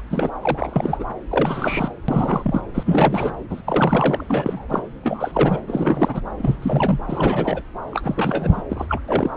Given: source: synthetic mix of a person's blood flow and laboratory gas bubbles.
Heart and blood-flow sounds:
Doppler ultrasound of blood flow; subclavian vein
0.10-0.30 s: bubbles
0.41-1.04 s: bubbles
1.30-1.92 s: bubbles
2.08-2.62 s: bubbles
2.73-3.32 s: bubbles
3.50-3.62 s: bubbles
3.66-4.24 s: bubbles
4.29-4.83 s: bubbles
5.03-5.61 s: bubbles
5.67-6.21 s: bubbles
6.38-6.99 s: bubbles
7.06-7.63 s: bubbles
7.91-8.63 s: bubbles
8.69-8.86 s: bubbles
8.89-9.00 s: bubbles
9.07-9.31 s: bubbles
From the record:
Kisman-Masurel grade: 343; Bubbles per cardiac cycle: rolling drumbeat, 9 or more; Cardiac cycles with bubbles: 100%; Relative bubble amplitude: loud (0.450 to 0.775); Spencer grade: 3 (all of the cardiac periods contain showers or single bubble signals, but not dominating or overriding the cardiac motion signals); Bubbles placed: anywhere in the cardiac cycle

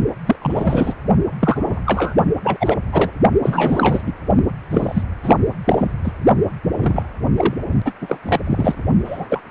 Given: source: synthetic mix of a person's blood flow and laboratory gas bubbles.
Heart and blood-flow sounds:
Doppler ultrasound of blood flow; precordium
0.26-0.35 s: bubbles
0.41-0.93 s: bubbles
1.40-1.81 s: bubbles
1.86-2.14 s: bubbles
2.43-2.57 s: bubbles
2.60-2.77 s: bubbles
2.92-3.11 s: bubbles
3.42-4.03 s: bubbles
4.06-4.12 s: bubbles
4.71-5.03 s: bubbles
5.23-5.36 s: bubbles
5.64-5.91 s: bubbles
6.04-6.13 s: bubbles
6.78-7.03 s: bubbles
7.37-7.54 s: bubbles
7.85-7.92 s: bubbles
8.01-8.17 s: bubbles
8.22-8.40 s: bubbles
8.44-8.75 s: bubbles
9.04-9.25 s: bubbles
9.29-9.42 s: bubbles
From the record:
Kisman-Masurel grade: 233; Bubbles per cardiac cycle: several, 3 to 8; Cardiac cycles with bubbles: 50 to 99%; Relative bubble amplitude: loud (0.450 to 0.775); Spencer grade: 3 (all of the cardiac periods contain showers or single bubble signals, but not dominating or overriding the cardiac motion signals); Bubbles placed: only in the low amplitude regions of the cardiac cycle

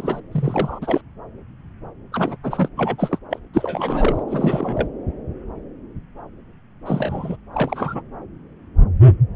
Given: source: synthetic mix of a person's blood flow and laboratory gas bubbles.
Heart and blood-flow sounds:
Doppler ultrasound of blood flow; subclavian vein
0.00-0.19 s: bubbles
0.31-0.79 s: bubbles
0.81-1.01 s: bubbles
2.12-2.36 s: bubbles
2.43-2.68 s: bubbles
2.77-3.18 s: bubbles
3.30-3.39 s: bubbles
3.54-4.23 s: bubbles
4.27-4.87 s: bubbles
6.85-7.36 s: bubbles
7.54-8.02 s: bubbles
From the record:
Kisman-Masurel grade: 332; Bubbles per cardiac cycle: rolling drumbeat, 9 or more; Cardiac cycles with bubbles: 50 to 99%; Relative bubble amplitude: moderate (0.250 to 0.450); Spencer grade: 3 (all of the cardiac periods contain showers or single bubble signals, but not dominating or overriding the cardiac motion signals); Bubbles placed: anywhere in the cardiac cycle

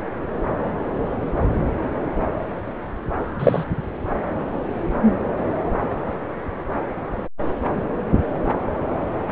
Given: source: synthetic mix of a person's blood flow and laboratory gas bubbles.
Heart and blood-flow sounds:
Doppler ultrasound of blood flow; subclavian vein
3.39-3.63 s: bubbles
From the record:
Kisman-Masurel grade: 113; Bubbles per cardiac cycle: 1 to 2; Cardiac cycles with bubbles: 1 to 10%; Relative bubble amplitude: loud (0.450 to 0.775); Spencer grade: 1 (occasional bubble signal discernible with the cardiac motion signal, with majority of cardiac periods free of bubbles); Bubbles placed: anywhere in the cardiac cycle

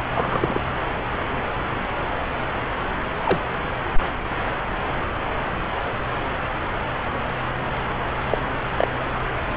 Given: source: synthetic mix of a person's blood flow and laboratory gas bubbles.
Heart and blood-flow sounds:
Doppler ultrasound of blood flow; subclavian vein
0.15-0.60 s: bubbles
3.24-3.39 s: bubbles
8.31-8.37 s: bubbles
8.76-8.88 s: bubbles
9.14-9.21 s: bubbles
From the record:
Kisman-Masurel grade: 123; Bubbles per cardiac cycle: 1 to 2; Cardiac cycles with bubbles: 10 to 50%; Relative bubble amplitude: loud (0.450 to 0.775); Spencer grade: 2 (many but less than half of the cardiac periods contain bubble signals, singularly or in groups); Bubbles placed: anywhere in the cardiac cycle

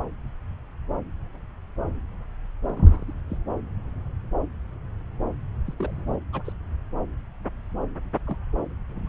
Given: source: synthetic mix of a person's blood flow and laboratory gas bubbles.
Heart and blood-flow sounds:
Doppler ultrasound of blood flow; subclavian vein
2.65-3.04 s: bubbles
3.07-3.13 s: bubbles
3.30-3.38 s: bubbles
5.67-5.74 s: bubbles
5.77-6.01 s: bubbles
6.06-6.17 s: bubbles
6.33-6.42 s: bubbles
6.44-6.52 s: bubbles
8.27-8.36 s: bubbles
8.90-9.09 s: bubbles
From the record:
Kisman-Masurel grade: 221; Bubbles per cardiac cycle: several, 3 to 8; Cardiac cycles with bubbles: 10 to 50%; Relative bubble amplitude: barely perceptible (0.100 to 0.250); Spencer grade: 2 (many but less than half of the cardiac periods contain bubble signals, singularly or in groups); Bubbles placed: anywhere in the cardiac cycle

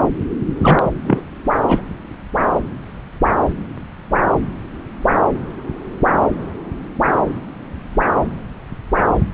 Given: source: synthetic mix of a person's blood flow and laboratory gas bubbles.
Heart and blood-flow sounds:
Doppler ultrasound of blood flow; subclavian vein
0.59-0.81 s: bubbles
1.04-1.22 s: bubbles
1.67-1.81 s: bubbles
From the record:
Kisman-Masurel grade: 222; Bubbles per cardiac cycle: several, 3 to 8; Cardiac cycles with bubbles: 10 to 50%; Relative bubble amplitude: moderate (0.250 to 0.450); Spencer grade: 2 (many but less than half of the cardiac periods contain bubble signals, singularly or in groups); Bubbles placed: anywhere in the cardiac cycle

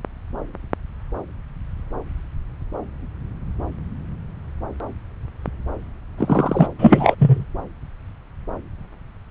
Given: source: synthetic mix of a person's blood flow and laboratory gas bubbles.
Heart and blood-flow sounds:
Doppler ultrasound of blood flow; subclavian vein
6.18-6.67 s: bubbles
6.79-7.15 s: bubbles
7.19-7.44 s: bubbles
From the record:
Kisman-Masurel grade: 213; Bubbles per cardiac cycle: several, 3 to 8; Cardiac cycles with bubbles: 1 to 10%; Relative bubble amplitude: loud (0.450 to 0.775); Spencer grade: 1 (occasional bubble signal discernible with the cardiac motion signal, with majority of cardiac periods free of bubbles); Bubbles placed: anywhere in the cardiac cycle

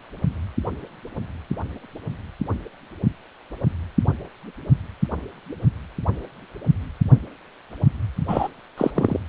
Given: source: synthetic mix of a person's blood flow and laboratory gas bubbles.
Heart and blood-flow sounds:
Doppler ultrasound of blood flow; precordium
8.28-8.47 s: bubbles
8.78-8.90 s: bubbles
8.95-9.20 s: bubbles
From the record:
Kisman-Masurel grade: 213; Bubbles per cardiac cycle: several, 3 to 8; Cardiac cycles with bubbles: 1 to 10%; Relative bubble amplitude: loud (0.450 to 0.775); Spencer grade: 1 (occasional bubble signal discernible with the cardiac motion signal, with majority of cardiac periods free of bubbles); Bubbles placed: only in the low amplitude regions of the cardiac cycle

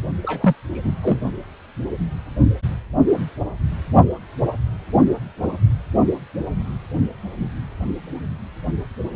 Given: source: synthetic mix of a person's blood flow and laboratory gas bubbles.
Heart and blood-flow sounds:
Doppler ultrasound of blood flow; precordium
0.22-0.55 s: bubbles
0.74-0.93 s: bubbles
1.01-1.19 s: bubbles
From the record:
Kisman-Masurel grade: 222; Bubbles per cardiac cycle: several, 3 to 8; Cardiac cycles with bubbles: 10 to 50%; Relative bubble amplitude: moderate (0.250 to 0.450); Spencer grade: 2 (many but less than half of the cardiac periods contain bubble signals, singularly or in groups); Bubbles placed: anywhere in the cardiac cycle

